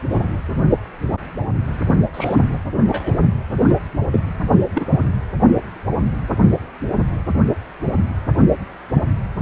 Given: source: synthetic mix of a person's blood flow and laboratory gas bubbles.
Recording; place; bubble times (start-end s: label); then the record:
Doppler ultrasound of blood flow; precordium
0.10-0.36 s: bubbles
2.14-2.35 s: bubbles
2.87-3.13 s: bubbles
3.69-3.75 s: bubbles
4.12-4.19 s: bubbles
4.75-4.89 s: bubbles
From the record:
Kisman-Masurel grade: 122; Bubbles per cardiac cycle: 1 to 2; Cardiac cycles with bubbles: 10 to 50%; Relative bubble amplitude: moderate (0.250 to 0.450); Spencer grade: 2 (many but less than half of the cardiac periods contain bubble signals, singularly or in groups); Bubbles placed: only in the low amplitude regions of the cardiac cycle